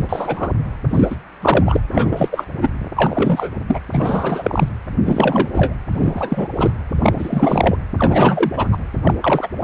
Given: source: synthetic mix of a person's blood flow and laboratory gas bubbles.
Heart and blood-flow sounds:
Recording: Doppler ultrasound of blood flow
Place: precordium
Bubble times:
0.00-0.51 s: bubbles
0.89-1.16 s: bubbles
1.41-1.80 s: bubbles
1.92-2.45 s: bubbles
2.61-2.69 s: bubbles
2.96-3.50 s: bubbles
3.68-3.80 s: bubbles
3.92-4.69 s: bubbles
5.05-5.49 s: bubbles
5.54-5.74 s: bubbles
5.92-6.48 s: bubbles
6.57-6.71 s: bubbles
7.03-7.77 s: bubbles
7.99-8.69 s: bubbles
8.71-8.77 s: bubbles
9.04-9.15 s: bubbles
9.21-9.48 s: bubbles
9.60-9.64 s: bubbles
From the record:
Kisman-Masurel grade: 343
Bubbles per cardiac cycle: rolling drumbeat, 9 or more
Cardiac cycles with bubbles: 100%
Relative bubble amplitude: loud (0.450 to 0.775)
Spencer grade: 3 (all of the cardiac periods contain showers or single bubble signals, but not dominating or overriding the cardiac motion signals)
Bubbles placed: anywhere in the cardiac cycle

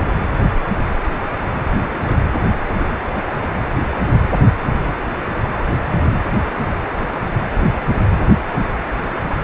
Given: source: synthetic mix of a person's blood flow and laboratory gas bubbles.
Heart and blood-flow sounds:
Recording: Doppler ultrasound of blood flow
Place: precordium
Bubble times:
0.78-0.86 s: bubbles
1.44-1.48 s: bubbles
1.80-2.15 s: bubbles
2.70-2.75 s: bubbles
2.79-2.88 s: bubbles
3.54-3.68 s: bubbles
4.85-4.92 s: bubbles
5.51-5.66 s: bubbles
5.86-6.10 s: bubbles
From the record:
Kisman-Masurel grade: 121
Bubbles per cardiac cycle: 1 to 2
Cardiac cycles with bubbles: 10 to 50%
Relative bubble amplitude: barely perceptible (0.100 to 0.250)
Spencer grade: 2 (many but less than half of the cardiac periods contain bubble signals, singularly or in groups)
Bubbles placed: anywhere in the cardiac cycle

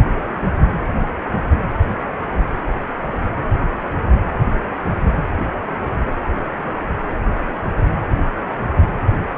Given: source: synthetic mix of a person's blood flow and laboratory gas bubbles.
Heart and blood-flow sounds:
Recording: Doppler ultrasound of blood flow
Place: precordium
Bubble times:
no bubbles
From the record:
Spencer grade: 0 (complete lack of bubble signals)

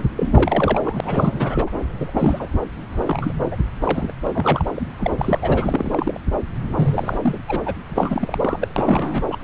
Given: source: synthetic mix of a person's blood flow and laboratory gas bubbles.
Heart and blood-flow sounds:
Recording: Doppler ultrasound of blood flow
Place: subclavian vein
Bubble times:
0.16-1.70 s: bubbles
1.98-2.49 s: bubbles
2.92-3.33 s: bubbles
3.51-3.56 s: bubbles
3.81-4.13 s: bubbles
4.24-4.67 s: bubbles
4.75-4.86 s: bubbles
4.98-5.11 s: bubbles
5.17-5.38 s: bubbles
5.42-6.21 s: bubbles
6.76-7.18 s: bubbles
7.21-7.38 s: bubbles
7.47-7.61 s: bubbles
7.65-7.76 s: bubbles
7.88-8.67 s: bubbles
8.76-9.23 s: bubbles
9.29-9.38 s: bubbles
From the record:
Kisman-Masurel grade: 342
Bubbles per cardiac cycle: rolling drumbeat, 9 or more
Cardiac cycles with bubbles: 100%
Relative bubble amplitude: moderate (0.250 to 0.450)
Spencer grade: 3 (all of the cardiac periods contain showers or single bubble signals, but not dominating or overriding the cardiac motion signals)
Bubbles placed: anywhere in the cardiac cycle

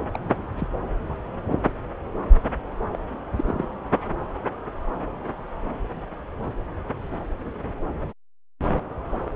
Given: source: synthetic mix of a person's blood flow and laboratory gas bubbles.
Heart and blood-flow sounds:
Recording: Doppler ultrasound of blood flow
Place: subclavian vein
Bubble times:
0.00-0.05 s: bubbles
0.13-0.20 s: bubbles
0.55-0.68 s: bubbles
1.10-1.15 s: bubbles
2.91-2.99 s: bubbles
3.35-3.69 s: bubbles
From the record:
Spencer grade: 2 (many but less than half of the cardiac periods contain bubble signals, singularly or in groups)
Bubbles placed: anywhere in the cardiac cycle

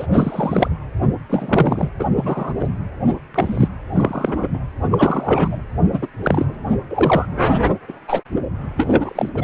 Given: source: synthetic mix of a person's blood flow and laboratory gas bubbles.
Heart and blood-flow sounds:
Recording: Doppler ultrasound of blood flow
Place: precordium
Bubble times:
0.00-0.07 s: bubbles
0.12-0.69 s: bubbles
1.30-1.90 s: bubbles
1.99-2.06 s: bubbles
2.16-2.53 s: bubbles
2.58-2.69 s: bubbles
3.34-3.68 s: bubbles
3.93-4.47 s: bubbles
4.53-4.59 s: bubbles
4.90-5.62 s: bubbles
5.92-6.07 s: bubbles
6.23-6.45 s: bubbles
6.89-7.26 s: bubbles
7.88-7.92 s: bubbles
8.08-8.21 s: bubbles
8.77-9.29 s: bubbles
9.35-9.44 s: bubbles
From the record:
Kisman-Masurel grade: 243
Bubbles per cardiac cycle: several, 3 to 8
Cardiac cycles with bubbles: 100%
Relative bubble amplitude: loud (0.450 to 0.775)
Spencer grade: 3 (all of the cardiac periods contain showers or single bubble signals, but not dominating or overriding the cardiac motion signals)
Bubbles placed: anywhere in the cardiac cycle

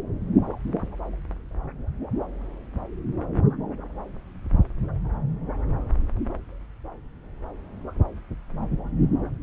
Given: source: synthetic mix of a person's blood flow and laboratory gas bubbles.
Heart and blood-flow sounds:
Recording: Doppler ultrasound of blood flow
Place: subclavian vein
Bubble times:
no bubbles
From the record:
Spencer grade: 0 (complete lack of bubble signals)

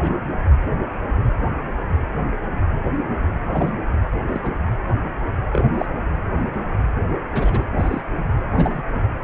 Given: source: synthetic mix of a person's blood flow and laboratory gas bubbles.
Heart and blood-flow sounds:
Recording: Doppler ultrasound of blood flow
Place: precordium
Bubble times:
0.00-0.13 s: bubbles
3.52-3.73 s: bubbles
4.26-4.40 s: bubbles
4.43-4.54 s: bubbles
5.51-5.65 s: bubbles
5.74-5.86 s: bubbles
7.31-7.65 s: bubbles
7.78-8.01 s: bubbles
8.55-8.83 s: bubbles
From the record:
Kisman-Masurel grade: 122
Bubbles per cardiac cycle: 1 to 2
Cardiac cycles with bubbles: 10 to 50%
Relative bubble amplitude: moderate (0.250 to 0.450)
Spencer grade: 2 (many but less than half of the cardiac periods contain bubble signals, singularly or in groups)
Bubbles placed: anywhere in the cardiac cycle

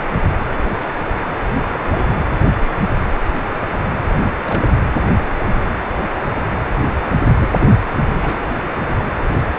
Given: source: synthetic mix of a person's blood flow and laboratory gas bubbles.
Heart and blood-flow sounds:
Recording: Doppler ultrasound of blood flow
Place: precordium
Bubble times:
0.00-0.05 s: bubbles
1.73-1.79 s: bubbles
1.82-2.19 s: bubbles
4.12-4.32 s: bubbles
4.41-4.81 s: bubbles
7.40-7.49 s: bubbles
7.52-7.58 s: bubbles
7.60-7.67 s: bubbles
8.21-8.39 s: bubbles
From the record:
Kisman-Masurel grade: 221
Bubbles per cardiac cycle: several, 3 to 8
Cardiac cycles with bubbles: 10 to 50%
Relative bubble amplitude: barely perceptible (0.100 to 0.250)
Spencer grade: 2 (many but less than half of the cardiac periods contain bubble signals, singularly or in groups)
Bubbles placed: anywhere in the cardiac cycle

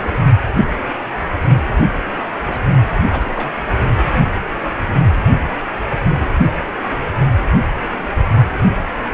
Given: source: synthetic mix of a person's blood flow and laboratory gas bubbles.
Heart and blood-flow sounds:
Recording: Doppler ultrasound of blood flow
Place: precordium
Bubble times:
2.46-2.58 s: bubbles
3.12-3.29 s: bubbles
3.35-3.52 s: bubbles
From the record:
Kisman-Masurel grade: 121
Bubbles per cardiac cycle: 1 to 2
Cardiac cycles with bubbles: 10 to 50%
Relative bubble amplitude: barely perceptible (0.100 to 0.250)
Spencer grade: 2 (many but less than half of the cardiac periods contain bubble signals, singularly or in groups)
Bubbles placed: only in the low amplitude regions of the cardiac cycle

